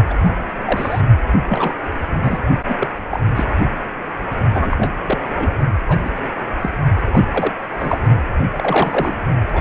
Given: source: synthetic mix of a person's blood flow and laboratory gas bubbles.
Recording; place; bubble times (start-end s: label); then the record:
Doppler ultrasound of blood flow; precordium
0.10-0.14 s: bubbles
0.25-0.34 s: bubbles
0.65-1.01 s: bubbles
1.48-1.73 s: bubbles
2.23-2.42 s: bubbles
2.68-2.75 s: bubbles
2.80-2.88 s: bubbles
3.11-3.20 s: bubbles
3.35-3.44 s: bubbles
4.54-4.91 s: bubbles
5.04-5.19 s: bubbles
5.31-5.55 s: bubbles
5.88-5.99 s: bubbles
6.04-6.11 s: bubbles
6.61-6.70 s: bubbles
7.12-7.27 s: bubbles
7.31-7.53 s: bubbles
7.79-7.98 s: bubbles
8.56-9.16 s: bubbles
9.54-9.61 s: bubbles
From the record:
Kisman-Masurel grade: 242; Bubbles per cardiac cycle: several, 3 to 8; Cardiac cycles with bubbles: 100%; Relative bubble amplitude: moderate (0.250 to 0.450); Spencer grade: 3 (all of the cardiac periods contain showers or single bubble signals, but not dominating or overriding the cardiac motion signals); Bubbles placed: only in the low amplitude regions of the cardiac cycle